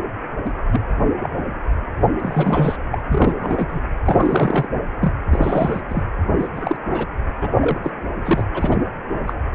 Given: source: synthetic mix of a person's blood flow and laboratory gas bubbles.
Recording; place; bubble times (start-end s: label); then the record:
Doppler ultrasound of blood flow; precordium
0.45-0.51 s: bubbles
0.72-0.80 s: bubbles
1.19-1.39 s: bubbles
2.20-2.77 s: bubbles
2.92-3.02 s: bubbles
3.09-3.67 s: bubbles
3.69-3.81 s: bubbles
4.04-4.68 s: bubbles
5.01-5.13 s: bubbles
5.29-5.81 s: bubbles
5.89-6.02 s: bubbles
6.39-6.48 s: bubbles
6.55-6.76 s: bubbles
6.91-7.06 s: bubbles
7.41-7.56 s: bubbles
7.61-7.79 s: bubbles
7.84-7.92 s: bubbles
8.24-8.45 s: bubbles
8.54-8.77 s: bubbles
9.27-9.33 s: bubbles
From the record:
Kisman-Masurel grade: 242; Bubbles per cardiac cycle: several, 3 to 8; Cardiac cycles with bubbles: 100%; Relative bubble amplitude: moderate (0.250 to 0.450); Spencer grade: 3 (all of the cardiac periods contain showers or single bubble signals, but not dominating or overriding the cardiac motion signals); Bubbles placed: anywhere in the cardiac cycle